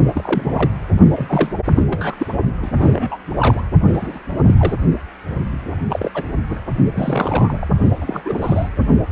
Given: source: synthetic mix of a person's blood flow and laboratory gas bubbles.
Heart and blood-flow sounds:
Doppler ultrasound of blood flow; precordium
0.14-0.71 s: bubbles
1.15-1.51 s: bubbles
1.68-1.83 s: bubbles
1.89-2.15 s: bubbles
2.19-2.26 s: bubbles
2.62-2.71 s: bubbles
2.77-3.17 s: bubbles
3.38-3.62 s: bubbles
3.87-4.19 s: bubbles
4.46-4.54 s: bubbles
4.58-4.79 s: bubbles
5.89-6.11 s: bubbles
6.14-6.22 s: bubbles
6.50-6.60 s: bubbles
6.94-7.67 s: bubbles
8.01-8.22 s: bubbles
8.25-8.70 s: bubbles
From the record:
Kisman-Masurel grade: 242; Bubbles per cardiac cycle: several, 3 to 8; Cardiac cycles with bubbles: 100%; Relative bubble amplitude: moderate (0.250 to 0.450); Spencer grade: 3 (all of the cardiac periods contain showers or single bubble signals, but not dominating or overriding the cardiac motion signals); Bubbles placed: only in the low amplitude regions of the cardiac cycle

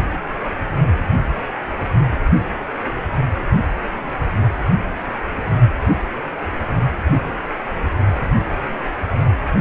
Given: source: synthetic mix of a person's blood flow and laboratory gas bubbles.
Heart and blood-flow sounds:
Doppler ultrasound of blood flow; precordium
9.54-9.61 s: bubbles
From the record:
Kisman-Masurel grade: 211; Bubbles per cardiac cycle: several, 3 to 8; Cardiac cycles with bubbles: 1 to 10%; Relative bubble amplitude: barely perceptible (0.100 to 0.250); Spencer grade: 1 (occasional bubble signal discernible with the cardiac motion signal, with majority of cardiac periods free of bubbles); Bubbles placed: anywhere in the cardiac cycle

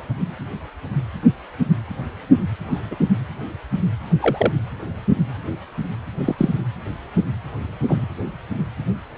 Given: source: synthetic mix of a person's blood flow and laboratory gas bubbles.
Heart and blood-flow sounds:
Doppler ultrasound of blood flow; precordium
2.71-2.80 s: bubbles
2.90-2.96 s: bubbles
4.19-4.52 s: bubbles
6.21-6.35 s: bubbles
6.38-6.53 s: bubbles
7.88-8.05 s: bubbles
From the record:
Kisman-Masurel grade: 122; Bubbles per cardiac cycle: 1 to 2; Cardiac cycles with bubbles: 10 to 50%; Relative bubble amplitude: moderate (0.250 to 0.450); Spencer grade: 2 (many but less than half of the cardiac periods contain bubble signals, singularly or in groups); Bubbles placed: anywhere in the cardiac cycle

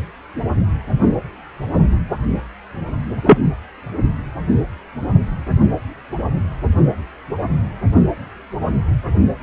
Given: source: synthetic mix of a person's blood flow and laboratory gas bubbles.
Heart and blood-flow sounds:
Doppler ultrasound of blood flow; precordium
3.27-3.38 s: bubbles
From the record:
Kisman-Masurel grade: 113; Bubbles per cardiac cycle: 1 to 2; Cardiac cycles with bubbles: 1 to 10%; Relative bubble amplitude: loud (0.450 to 0.775); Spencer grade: 1 (occasional bubble signal discernible with the cardiac motion signal, with majority of cardiac periods free of bubbles); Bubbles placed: anywhere in the cardiac cycle

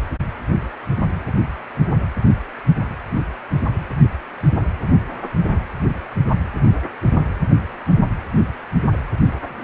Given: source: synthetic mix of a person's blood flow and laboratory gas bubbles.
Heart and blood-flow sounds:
Doppler ultrasound of blood flow; precordium
9.56-9.64 s: bubbles
From the record:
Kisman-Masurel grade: 111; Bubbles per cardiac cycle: 1 to 2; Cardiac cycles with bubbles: 1 to 10%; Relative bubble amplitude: barely perceptible (0.100 to 0.250); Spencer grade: 1 (occasional bubble signal discernible with the cardiac motion signal, with majority of cardiac periods free of bubbles); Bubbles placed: anywhere in the cardiac cycle

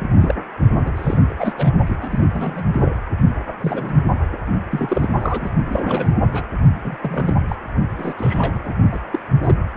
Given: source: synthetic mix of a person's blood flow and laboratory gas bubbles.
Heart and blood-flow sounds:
Doppler ultrasound of blood flow; precordium
0.00-0.35 s: bubbles
0.78-1.17 s: bubbles
1.29-1.34 s: bubbles
1.39-1.70 s: bubbles
1.85-1.96 s: bubbles
2.00-2.26 s: bubbles
2.28-2.65 s: bubbles
2.72-2.95 s: bubbles
3.60-3.94 s: bubbles
4.71-5.09 s: bubbles
5.20-5.51 s: bubbles
5.65-6.14 s: bubbles
6.32-6.44 s: bubbles
6.84-6.96 s: bubbles
7.03-7.38 s: bubbles
7.48-7.56 s: bubbles
7.98-8.14 s: bubbles
8.18-8.60 s: bubbles
8.65-8.72 s: bubbles
8.92-8.99 s: bubbles
9.12-9.19 s: bubbles
9.41-9.54 s: bubbles
From the record:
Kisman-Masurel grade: 242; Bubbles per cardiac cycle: several, 3 to 8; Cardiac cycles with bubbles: 100%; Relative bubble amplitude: moderate (0.250 to 0.450); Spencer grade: 3 (all of the cardiac periods contain showers or single bubble signals, but not dominating or overriding the cardiac motion signals); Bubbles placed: only in the low amplitude regions of the cardiac cycle

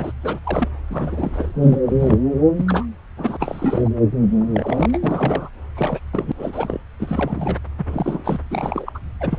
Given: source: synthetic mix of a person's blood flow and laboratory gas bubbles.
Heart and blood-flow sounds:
Doppler ultrasound of blood flow; subclavian vein
0.00-0.12 s: bubbles
0.22-0.40 s: bubbles
0.43-0.67 s: bubbles
0.90-1.52 s: bubbles
1.61-1.81 s: bubbles
1.85-2.18 s: bubbles
2.56-2.85 s: bubbles
3.17-3.37 s: bubbles
3.40-3.89 s: bubbles
4.38-5.49 s: bubbles
5.75-6.00 s: bubbles
6.12-6.32 s: bubbles
6.38-6.84 s: bubbles
6.99-7.57 s: bubbles
7.77-8.40 s: bubbles
8.50-8.98 s: bubbles
9.21-9.39 s: bubbles
From the record:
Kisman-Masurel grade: 342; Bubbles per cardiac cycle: rolling drumbeat, 9 or more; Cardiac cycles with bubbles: 100%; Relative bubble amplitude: moderate (0.250 to 0.450); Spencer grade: 3 (all of the cardiac periods contain showers or single bubble signals, but not dominating or overriding the cardiac motion signals); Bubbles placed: anywhere in the cardiac cycle

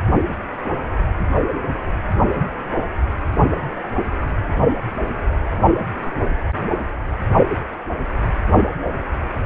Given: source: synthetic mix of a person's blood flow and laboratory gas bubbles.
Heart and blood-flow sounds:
Doppler ultrasound of blood flow; precordium
no bubbles
From the record:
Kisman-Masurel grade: 000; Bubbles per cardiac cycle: 0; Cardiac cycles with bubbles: 0%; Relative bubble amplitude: no bubbles discernible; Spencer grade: 0 (complete lack of bubble signals)

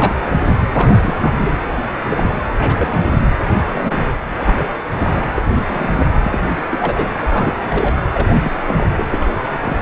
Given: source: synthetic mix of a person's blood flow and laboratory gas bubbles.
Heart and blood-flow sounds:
Doppler ultrasound of blood flow; precordium
0.00-0.17 s: bubbles
0.72-1.33 s: bubbles
1.39-1.52 s: bubbles
2.10-2.31 s: bubbles
2.58-3.10 s: bubbles
3.73-4.14 s: bubbles
4.43-4.54 s: bubbles
4.58-4.65 s: bubbles
5.00-5.23 s: bubbles
5.35-5.42 s: bubbles
5.54-5.89 s: bubbles
5.94-6.06 s: bubbles
6.22-6.55 s: bubbles
6.71-7.11 s: bubbles
7.22-7.94 s: bubbles
8.12-8.38 s: bubbles
8.44-8.52 s: bubbles
8.65-8.86 s: bubbles
8.97-9.05 s: bubbles
9.12-9.31 s: bubbles
9.49-9.75 s: bubbles
From the record:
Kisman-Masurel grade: 242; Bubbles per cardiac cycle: several, 3 to 8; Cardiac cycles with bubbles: 100%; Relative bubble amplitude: moderate (0.250 to 0.450); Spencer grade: 3 (all of the cardiac periods contain showers or single bubble signals, but not dominating or overriding the cardiac motion signals); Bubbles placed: anywhere in the cardiac cycle

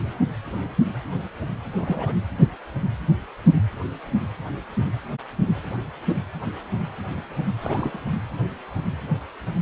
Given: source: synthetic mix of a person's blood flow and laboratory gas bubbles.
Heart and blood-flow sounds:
Doppler ultrasound of blood flow; precordium
1.77-2.18 s: bubbles
7.60-7.99 s: bubbles
8.08-8.15 s: bubbles
From the record:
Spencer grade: 1 (occasional bubble signal discernible with the cardiac motion signal, with majority of cardiac periods free of bubbles); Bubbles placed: anywhere in the cardiac cycle

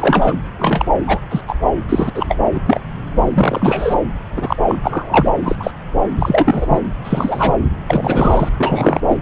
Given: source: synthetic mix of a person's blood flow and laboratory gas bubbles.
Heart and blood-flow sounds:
Doppler ultrasound of blood flow; subclavian vein
0.00-0.34 s: bubbles
0.58-0.85 s: bubbles
1.07-1.19 s: bubbles
1.30-1.41 s: bubbles
1.47-1.55 s: bubbles
1.89-2.12 s: bubbles
2.14-2.38 s: bubbles
2.54-2.60 s: bubbles
2.66-2.80 s: bubbles
3.24-3.95 s: bubbles
4.36-4.56 s: bubbles
4.67-4.79 s: bubbles
4.83-5.31 s: bubbles
5.43-5.55 s: bubbles
5.59-5.71 s: bubbles
6.18-6.79 s: bubbles
7.04-7.56 s: bubbles
7.87-8.50 s: bubbles
8.58-9.01 s: bubbles
9.08-9.16 s: bubbles
From the record:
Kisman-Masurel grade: 243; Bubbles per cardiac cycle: several, 3 to 8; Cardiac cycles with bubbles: 100%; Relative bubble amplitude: loud (0.450 to 0.775); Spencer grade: 3 (all of the cardiac periods contain showers or single bubble signals, but not dominating or overriding the cardiac motion signals); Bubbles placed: anywhere in the cardiac cycle

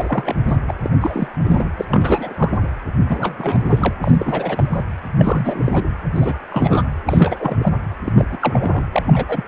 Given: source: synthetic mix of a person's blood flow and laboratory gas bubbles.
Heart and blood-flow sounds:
Doppler ultrasound of blood flow; precordium
0.00-0.36 s: bubbles
0.48-0.57 s: bubbles
0.67-0.73 s: bubbles
0.84-0.90 s: bubbles
1.01-1.27 s: bubbles
1.44-1.71 s: bubbles
1.77-1.85 s: bubbles
1.88-2.57 s: bubbles
2.61-2.67 s: bubbles
3.08-3.93 s: bubbles
4.04-4.83 s: bubbles
5.18-5.84 s: bubbles
6.14-6.38 s: bubbles
6.50-6.83 s: bubbles
7.06-7.73 s: bubbles
8.04-8.27 s: bubbles
8.32-8.38 s: bubbles
8.42-8.83 s: bubbles
8.92-9.03 s: bubbles
9.07-9.24 s: bubbles
9.28-9.45 s: bubbles
From the record:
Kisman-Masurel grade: 342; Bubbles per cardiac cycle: rolling drumbeat, 9 or more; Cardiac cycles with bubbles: 100%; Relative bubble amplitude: moderate (0.250 to 0.450); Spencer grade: 3 (all of the cardiac periods contain showers or single bubble signals, but not dominating or overriding the cardiac motion signals); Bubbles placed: anywhere in the cardiac cycle

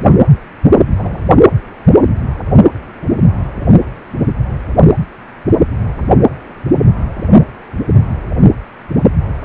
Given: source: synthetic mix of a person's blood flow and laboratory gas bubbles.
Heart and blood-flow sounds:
Doppler ultrasound of blood flow; precordium
0.97-1.21 s: bubbles
From the record:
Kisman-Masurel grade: 111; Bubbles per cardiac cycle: 1 to 2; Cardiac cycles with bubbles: 1 to 10%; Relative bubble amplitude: barely perceptible (0.100 to 0.250); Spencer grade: 1 (occasional bubble signal discernible with the cardiac motion signal, with majority of cardiac periods free of bubbles); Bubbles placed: only in the low amplitude regions of the cardiac cycle

